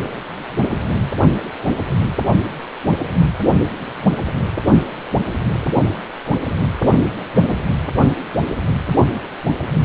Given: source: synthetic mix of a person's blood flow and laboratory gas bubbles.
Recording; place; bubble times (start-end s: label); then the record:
Doppler ultrasound of blood flow; precordium
6.87-6.92 s: bubbles
7.49-7.56 s: bubbles
From the record:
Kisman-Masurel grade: 112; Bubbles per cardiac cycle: 1 to 2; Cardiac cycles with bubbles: 1 to 10%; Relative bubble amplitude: moderate (0.250 to 0.450); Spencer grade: 1 (occasional bubble signal discernible with the cardiac motion signal, with majority of cardiac periods free of bubbles); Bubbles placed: anywhere in the cardiac cycle